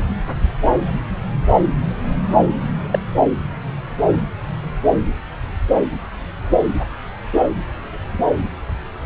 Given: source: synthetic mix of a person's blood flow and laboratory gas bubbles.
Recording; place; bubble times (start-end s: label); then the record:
Doppler ultrasound of blood flow; subclavian vein
2.91-2.99 s: bubbles
From the record:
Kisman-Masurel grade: 113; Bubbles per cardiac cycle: 1 to 2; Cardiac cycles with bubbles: 1 to 10%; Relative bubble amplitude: loud (0.450 to 0.775); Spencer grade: 1 (occasional bubble signal discernible with the cardiac motion signal, with majority of cardiac periods free of bubbles); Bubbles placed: anywhere in the cardiac cycle